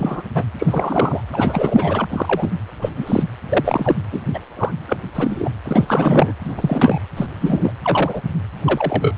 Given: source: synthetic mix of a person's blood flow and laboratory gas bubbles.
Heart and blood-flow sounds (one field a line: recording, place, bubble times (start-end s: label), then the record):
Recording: Doppler ultrasound of blood flow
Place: precordium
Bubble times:
0.00-0.26 s: bubbles
0.35-0.44 s: bubbles
0.58-1.21 s: bubbles
1.32-2.04 s: bubbles
2.10-2.52 s: bubbles
2.81-2.90 s: bubbles
2.96-3.24 s: bubbles
3.49-3.99 s: bubbles
4.12-4.20 s: bubbles
4.33-4.40 s: bubbles
4.57-4.71 s: bubbles
4.87-4.97 s: bubbles
5.15-5.50 s: bubbles
5.64-6.33 s: bubbles
6.45-6.54 s: bubbles
6.57-7.00 s: bubbles
7.17-7.26 s: bubbles
7.40-7.71 s: bubbles
7.82-8.21 s: bubbles
8.64-9.15 s: bubbles
From the record:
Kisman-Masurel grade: 243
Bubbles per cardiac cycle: several, 3 to 8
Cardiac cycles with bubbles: 100%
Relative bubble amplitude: loud (0.450 to 0.775)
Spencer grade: 3 (all of the cardiac periods contain showers or single bubble signals, but not dominating or overriding the cardiac motion signals)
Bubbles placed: anywhere in the cardiac cycle